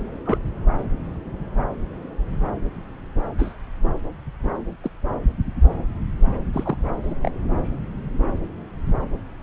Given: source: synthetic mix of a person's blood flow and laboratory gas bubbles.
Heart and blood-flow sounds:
Doppler ultrasound of blood flow; subclavian vein
0.26-0.38 s: bubbles
3.38-3.55 s: bubbles
4.83-4.90 s: bubbles
6.53-6.77 s: bubbles
7.03-7.14 s: bubbles
7.23-7.32 s: bubbles
From the record:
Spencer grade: 2 (many but less than half of the cardiac periods contain bubble signals, singularly or in groups); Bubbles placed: anywhere in the cardiac cycle

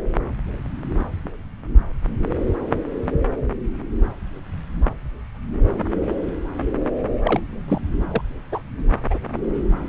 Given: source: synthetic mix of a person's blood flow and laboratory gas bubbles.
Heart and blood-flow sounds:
Doppler ultrasound of blood flow; subclavian vein
7.24-7.40 s: bubbles
7.68-7.82 s: bubbles
8.11-8.21 s: bubbles
8.51-8.60 s: bubbles
9.10-9.18 s: bubbles
From the record:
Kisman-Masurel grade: 122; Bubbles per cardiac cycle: 1 to 2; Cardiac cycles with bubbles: 10 to 50%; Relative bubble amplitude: moderate (0.250 to 0.450); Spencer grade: 2 (many but less than half of the cardiac periods contain bubble signals, singularly or in groups); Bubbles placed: anywhere in the cardiac cycle

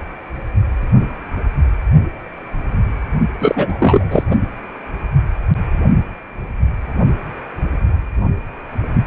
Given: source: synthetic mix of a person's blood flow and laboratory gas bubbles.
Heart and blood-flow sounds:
Doppler ultrasound of blood flow; precordium
3.38-4.23 s: bubbles
4.30-4.36 s: bubbles
From the record:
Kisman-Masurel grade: 213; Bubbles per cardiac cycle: several, 3 to 8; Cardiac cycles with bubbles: 1 to 10%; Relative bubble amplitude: loud (0.450 to 0.775); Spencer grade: 1 (occasional bubble signal discernible with the cardiac motion signal, with majority of cardiac periods free of bubbles); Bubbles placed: only in the low amplitude regions of the cardiac cycle

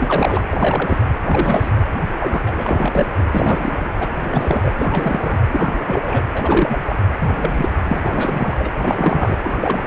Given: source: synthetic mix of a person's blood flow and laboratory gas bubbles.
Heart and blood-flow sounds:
Doppler ultrasound of blood flow; precordium
0.00-0.42 s: bubbles
0.51-0.99 s: bubbles
1.23-1.71 s: bubbles
2.19-2.42 s: bubbles
2.46-3.06 s: bubbles
3.17-3.23 s: bubbles
3.31-3.88 s: bubbles
3.99-4.12 s: bubbles
4.19-4.22 s: bubbles
4.24-4.73 s: bubbles
4.78-5.38 s: bubbles
5.48-5.77 s: bubbles
5.87-6.26 s: bubbles
6.35-6.77 s: bubbles
6.86-6.96 s: bubbles
7.20-7.68 s: bubbles
7.86-8.69 s: bubbles
8.77-9.37 s: bubbles
9.43-9.56 s: bubbles
9.60-9.87 s: bubbles
From the record:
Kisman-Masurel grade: 342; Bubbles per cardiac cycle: rolling drumbeat, 9 or more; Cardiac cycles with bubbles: 100%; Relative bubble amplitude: moderate (0.250 to 0.450); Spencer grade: 3 (all of the cardiac periods contain showers or single bubble signals, but not dominating or overriding the cardiac motion signals); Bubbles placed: anywhere in the cardiac cycle

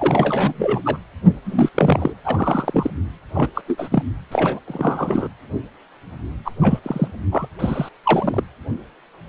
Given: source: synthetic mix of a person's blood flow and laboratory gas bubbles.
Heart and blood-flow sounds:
Doppler ultrasound of blood flow; precordium
0.00-0.82 s: bubbles
0.85-0.98 s: bubbles
1.45-1.69 s: bubbles
1.75-2.13 s: bubbles
2.25-2.90 s: bubbles
3.34-3.48 s: bubbles
3.54-3.61 s: bubbles
3.67-4.03 s: bubbles
4.31-4.59 s: bubbles
4.67-5.28 s: bubbles
6.45-6.51 s: bubbles
6.61-6.79 s: bubbles
6.83-7.08 s: bubbles
7.31-7.47 s: bubbles
7.59-7.89 s: bubbles
8.04-8.44 s: bubbles
From the record:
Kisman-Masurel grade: 233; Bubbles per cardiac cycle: several, 3 to 8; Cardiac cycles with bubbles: 50 to 99%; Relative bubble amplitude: loud (0.450 to 0.775); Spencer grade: 3 (all of the cardiac periods contain showers or single bubble signals, but not dominating or overriding the cardiac motion signals); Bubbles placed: anywhere in the cardiac cycle

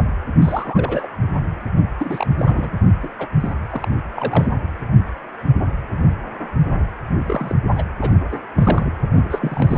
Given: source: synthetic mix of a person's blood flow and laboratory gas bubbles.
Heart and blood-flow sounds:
Doppler ultrasound of blood flow; precordium
0.42-1.07 s: bubbles
1.76-1.83 s: bubbles
1.99-2.27 s: bubbles
2.38-2.78 s: bubbles
3.02-3.14 s: bubbles
3.19-3.27 s: bubbles
3.40-3.53 s: bubbles
3.71-3.88 s: bubbles
4.15-4.54 s: bubbles
7.26-7.59 s: bubbles
7.75-7.83 s: bubbles
8.01-8.12 s: bubbles
8.31-8.38 s: bubbles
8.56-8.91 s: bubbles
8.99-9.77 s: bubbles
From the record:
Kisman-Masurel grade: 232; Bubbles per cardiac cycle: several, 3 to 8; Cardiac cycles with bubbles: 50 to 99%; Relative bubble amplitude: moderate (0.250 to 0.450); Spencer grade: 3 (all of the cardiac periods contain showers or single bubble signals, but not dominating or overriding the cardiac motion signals); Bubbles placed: anywhere in the cardiac cycle

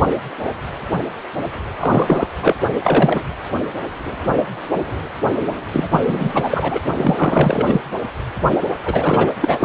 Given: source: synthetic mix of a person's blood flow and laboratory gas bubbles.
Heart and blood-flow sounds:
Doppler ultrasound of blood flow; precordium
1.80-2.27 s: bubbles
2.42-2.54 s: bubbles
2.82-3.23 s: bubbles
5.73-5.88 s: bubbles
5.91-6.79 s: bubbles
6.97-7.81 s: bubbles
8.85-9.33 s: bubbles
9.41-9.65 s: bubbles
From the record:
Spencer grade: 3 (all of the cardiac periods contain showers or single bubble signals, but not dominating or overriding the cardiac motion signals); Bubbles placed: anywhere in the cardiac cycle

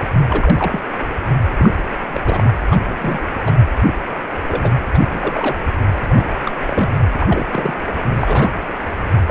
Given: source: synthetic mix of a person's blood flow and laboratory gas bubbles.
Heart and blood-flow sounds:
Doppler ultrasound of blood flow; precordium
0.28-0.81 s: bubbles
1.57-1.72 s: bubbles
1.78-1.83 s: bubbles
2.13-2.21 s: bubbles
2.25-2.51 s: bubbles
2.70-2.81 s: bubbles
2.84-3.28 s: bubbles
3.37-3.52 s: bubbles
3.86-3.94 s: bubbles
4.47-4.71 s: bubbles
4.94-5.57 s: bubbles
6.08-6.26 s: bubbles
6.46-6.50 s: bubbles
6.67-6.90 s: bubbles
7.13-7.74 s: bubbles
8.18-8.49 s: bubbles
9.28-9.31 s: bubbles
From the record:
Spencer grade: 3 (all of the cardiac periods contain showers or single bubble signals, but not dominating or overriding the cardiac motion signals); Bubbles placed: anywhere in the cardiac cycle

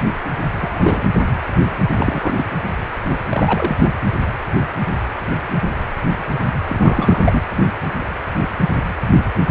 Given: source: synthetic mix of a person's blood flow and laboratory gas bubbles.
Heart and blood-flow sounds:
Doppler ultrasound of blood flow; precordium
0.58-1.05 s: bubbles
1.94-2.46 s: bubbles
3.29-3.77 s: bubbles
3.82-3.90 s: bubbles
6.69-7.42 s: bubbles
From the record:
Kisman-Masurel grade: 222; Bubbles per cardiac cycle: several, 3 to 8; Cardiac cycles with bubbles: 10 to 50%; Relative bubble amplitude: moderate (0.250 to 0.450); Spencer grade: 2 (many but less than half of the cardiac periods contain bubble signals, singularly or in groups); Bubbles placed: anywhere in the cardiac cycle

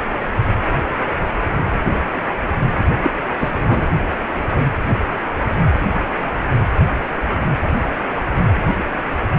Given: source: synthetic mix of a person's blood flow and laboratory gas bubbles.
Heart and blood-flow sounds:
Doppler ultrasound of blood flow; precordium
3.03-3.10 s: bubbles
3.39-3.51 s: bubbles
3.66-3.83 s: bubbles
From the record:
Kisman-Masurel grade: 213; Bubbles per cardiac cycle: several, 3 to 8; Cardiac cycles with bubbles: 1 to 10%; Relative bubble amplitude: loud (0.450 to 0.775); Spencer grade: 1 (occasional bubble signal discernible with the cardiac motion signal, with majority of cardiac periods free of bubbles); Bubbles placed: anywhere in the cardiac cycle

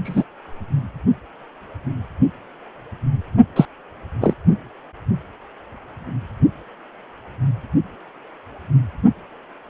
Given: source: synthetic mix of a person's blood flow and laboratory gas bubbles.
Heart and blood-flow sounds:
Doppler ultrasound of blood flow; precordium
0.04-0.24 s: bubbles
3.56-3.66 s: bubbles
4.21-4.34 s: bubbles
From the record:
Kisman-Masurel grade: 123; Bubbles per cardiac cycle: 1 to 2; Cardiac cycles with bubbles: 10 to 50%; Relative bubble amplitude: loud (0.450 to 0.775); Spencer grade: 2 (many but less than half of the cardiac periods contain bubble signals, singularly or in groups); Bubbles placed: only in the low amplitude regions of the cardiac cycle

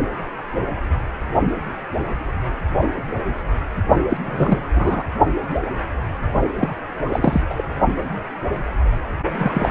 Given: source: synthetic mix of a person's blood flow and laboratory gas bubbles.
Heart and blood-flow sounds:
Doppler ultrasound of blood flow; precordium
4.09-4.17 s: bubbles
4.22-4.62 s: bubbles
4.75-5.03 s: bubbles
6.58-6.75 s: bubbles
7.08-7.42 s: bubbles
7.50-7.64 s: bubbles
9.38-9.69 s: bubbles
From the record:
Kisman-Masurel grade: 223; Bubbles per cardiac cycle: several, 3 to 8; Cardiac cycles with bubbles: 10 to 50%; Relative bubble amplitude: loud (0.450 to 0.775); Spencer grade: 2 (many but less than half of the cardiac periods contain bubble signals, singularly or in groups); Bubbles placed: only in the low amplitude regions of the cardiac cycle

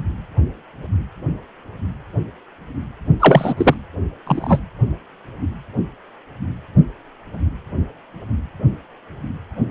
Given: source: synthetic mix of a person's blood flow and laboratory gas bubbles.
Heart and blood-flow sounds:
Doppler ultrasound of blood flow; precordium
3.19-3.54 s: bubbles
3.57-3.74 s: bubbles
4.27-4.60 s: bubbles
From the record:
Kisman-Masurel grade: 213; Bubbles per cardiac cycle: several, 3 to 8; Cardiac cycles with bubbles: 1 to 10%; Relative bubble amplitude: loud (0.450 to 0.775); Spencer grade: 1 (occasional bubble signal discernible with the cardiac motion signal, with majority of cardiac periods free of bubbles); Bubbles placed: only in the low amplitude regions of the cardiac cycle

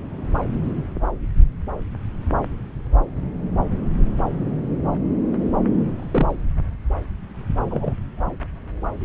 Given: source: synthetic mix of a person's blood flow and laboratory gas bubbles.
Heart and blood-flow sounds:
Doppler ultrasound of blood flow; subclavian vein
5.96-6.36 s: bubbles
7.71-7.93 s: bubbles
From the record:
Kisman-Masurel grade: 122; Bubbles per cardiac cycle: 1 to 2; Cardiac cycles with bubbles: 10 to 50%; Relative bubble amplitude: moderate (0.250 to 0.450); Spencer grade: 2 (many but less than half of the cardiac periods contain bubble signals, singularly or in groups); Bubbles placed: anywhere in the cardiac cycle

